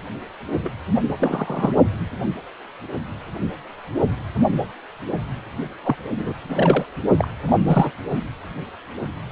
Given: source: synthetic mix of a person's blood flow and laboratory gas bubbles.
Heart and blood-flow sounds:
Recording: Doppler ultrasound of blood flow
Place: precordium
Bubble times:
0.62-0.71 s: bubbles
1.18-1.72 s: bubbles
5.83-5.96 s: bubbles
6.18-6.33 s: bubbles
6.49-6.85 s: bubbles
7.17-7.28 s: bubbles
7.47-7.56 s: bubbles
7.64-7.91 s: bubbles
8.12-8.20 s: bubbles
From the record:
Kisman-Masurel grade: 222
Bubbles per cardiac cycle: several, 3 to 8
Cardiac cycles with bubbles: 10 to 50%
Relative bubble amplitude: moderate (0.250 to 0.450)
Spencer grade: 2 (many but less than half of the cardiac periods contain bubble signals, singularly or in groups)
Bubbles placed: only in the low amplitude regions of the cardiac cycle

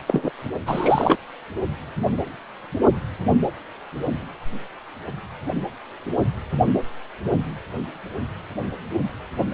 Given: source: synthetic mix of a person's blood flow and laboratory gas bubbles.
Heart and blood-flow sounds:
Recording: Doppler ultrasound of blood flow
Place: precordium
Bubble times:
0.07-0.30 s: bubbles
0.66-1.17 s: bubbles
From the record:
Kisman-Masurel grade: 223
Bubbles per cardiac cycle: several, 3 to 8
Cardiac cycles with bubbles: 10 to 50%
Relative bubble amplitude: loud (0.450 to 0.775)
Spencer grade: 2 (many but less than half of the cardiac periods contain bubble signals, singularly or in groups)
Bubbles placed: only in the low amplitude regions of the cardiac cycle

